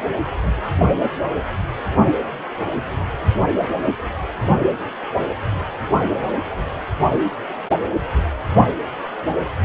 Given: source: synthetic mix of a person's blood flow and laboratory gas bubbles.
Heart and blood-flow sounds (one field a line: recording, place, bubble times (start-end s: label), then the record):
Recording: Doppler ultrasound of blood flow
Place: precordium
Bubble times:
0.00-0.03 s: bubbles
From the record:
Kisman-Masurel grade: 111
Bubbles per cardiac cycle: 1 to 2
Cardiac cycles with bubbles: 1 to 10%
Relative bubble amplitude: barely perceptible (0.100 to 0.250)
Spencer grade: 1 (occasional bubble signal discernible with the cardiac motion signal, with majority of cardiac periods free of bubbles)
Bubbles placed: anywhere in the cardiac cycle